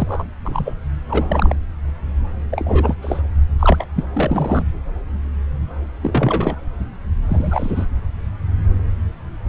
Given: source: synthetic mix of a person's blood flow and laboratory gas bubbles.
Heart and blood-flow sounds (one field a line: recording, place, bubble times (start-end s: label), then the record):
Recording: Doppler ultrasound of blood flow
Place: subclavian vein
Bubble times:
0.00-0.25 s: bubbles
0.45-0.74 s: bubbles
1.08-1.55 s: bubbles
2.50-2.95 s: bubbles
3.01-3.22 s: bubbles
3.59-3.87 s: bubbles
3.95-4.04 s: bubbles
4.15-4.64 s: bubbles
6.03-6.55 s: bubbles
7.29-7.86 s: bubbles
From the record:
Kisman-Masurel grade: 232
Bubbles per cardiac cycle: several, 3 to 8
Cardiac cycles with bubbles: 50 to 99%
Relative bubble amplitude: moderate (0.250 to 0.450)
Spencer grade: 3 (all of the cardiac periods contain showers or single bubble signals, but not dominating or overriding the cardiac motion signals)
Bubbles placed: anywhere in the cardiac cycle